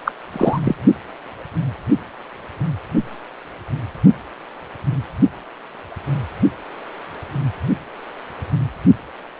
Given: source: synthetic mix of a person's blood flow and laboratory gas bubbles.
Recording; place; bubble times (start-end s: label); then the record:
Doppler ultrasound of blood flow; precordium
0.04-0.12 s: bubbles
0.32-0.59 s: bubbles
0.64-0.75 s: bubbles
From the record:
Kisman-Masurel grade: 213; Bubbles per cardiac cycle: several, 3 to 8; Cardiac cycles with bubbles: 1 to 10%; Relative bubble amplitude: loud (0.450 to 0.775); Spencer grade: 1 (occasional bubble signal discernible with the cardiac motion signal, with majority of cardiac periods free of bubbles); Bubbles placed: only in the low amplitude regions of the cardiac cycle